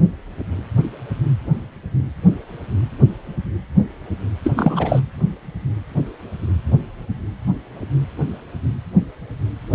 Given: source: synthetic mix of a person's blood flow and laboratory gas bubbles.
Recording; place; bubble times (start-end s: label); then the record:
Doppler ultrasound of blood flow; precordium
4.44-4.51 s: bubbles
4.57-5.00 s: bubbles
From the record:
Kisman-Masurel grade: 213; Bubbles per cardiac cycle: several, 3 to 8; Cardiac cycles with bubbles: 1 to 10%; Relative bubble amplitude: loud (0.450 to 0.775); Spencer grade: 1 (occasional bubble signal discernible with the cardiac motion signal, with majority of cardiac periods free of bubbles); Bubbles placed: anywhere in the cardiac cycle